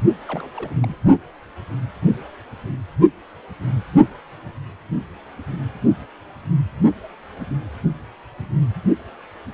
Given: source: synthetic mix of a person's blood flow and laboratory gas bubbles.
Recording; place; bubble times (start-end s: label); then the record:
Doppler ultrasound of blood flow; precordium
0.28-0.50 s: bubbles
0.57-0.96 s: bubbles
From the record:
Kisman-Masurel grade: 211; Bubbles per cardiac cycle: several, 3 to 8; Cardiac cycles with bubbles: 1 to 10%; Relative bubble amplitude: barely perceptible (0.100 to 0.250); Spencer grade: 1 (occasional bubble signal discernible with the cardiac motion signal, with majority of cardiac periods free of bubbles); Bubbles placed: only in the low amplitude regions of the cardiac cycle